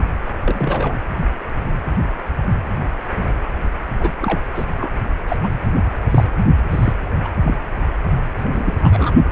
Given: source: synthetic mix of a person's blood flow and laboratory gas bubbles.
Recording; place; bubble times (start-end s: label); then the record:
Doppler ultrasound of blood flow; precordium
0.45-0.96 s: bubbles
3.99-4.11 s: bubbles
4.22-4.40 s: bubbles
4.54-4.65 s: bubbles
4.77-4.93 s: bubbles
5.28-5.37 s: bubbles
5.43-5.51 s: bubbles
6.11-6.26 s: bubbles
6.71-6.93 s: bubbles
7.24-7.29 s: bubbles
7.43-7.57 s: bubbles
8.38-9.12 s: bubbles
From the record:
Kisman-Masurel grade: 222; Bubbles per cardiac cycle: several, 3 to 8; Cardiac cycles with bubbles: 10 to 50%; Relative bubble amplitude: moderate (0.250 to 0.450); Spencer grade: 2 (many but less than half of the cardiac periods contain bubble signals, singularly or in groups); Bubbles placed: only in the low amplitude regions of the cardiac cycle